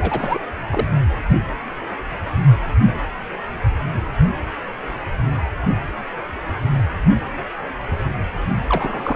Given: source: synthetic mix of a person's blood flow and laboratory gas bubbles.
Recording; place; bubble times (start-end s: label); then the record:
Doppler ultrasound of blood flow; precordium
0.00-0.40 s: bubbles
0.70-0.87 s: bubbles
8.68-9.16 s: bubbles
From the record:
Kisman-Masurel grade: 222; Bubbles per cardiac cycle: several, 3 to 8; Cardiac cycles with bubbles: 10 to 50%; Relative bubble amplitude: moderate (0.250 to 0.450); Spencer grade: 2 (many but less than half of the cardiac periods contain bubble signals, singularly or in groups); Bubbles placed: only in the low amplitude regions of the cardiac cycle